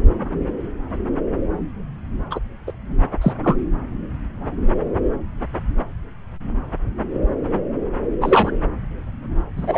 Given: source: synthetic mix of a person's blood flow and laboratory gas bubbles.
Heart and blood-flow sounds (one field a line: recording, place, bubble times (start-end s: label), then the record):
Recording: Doppler ultrasound of blood flow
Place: subclavian vein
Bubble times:
2.30-2.40 s: bubbles
2.67-2.72 s: bubbles
3.21-3.33 s: bubbles
3.43-3.56 s: bubbles
8.21-8.51 s: bubbles
9.56-9.78 s: bubbles
From the record:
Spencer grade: 2 (many but less than half of the cardiac periods contain bubble signals, singularly or in groups)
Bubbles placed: anywhere in the cardiac cycle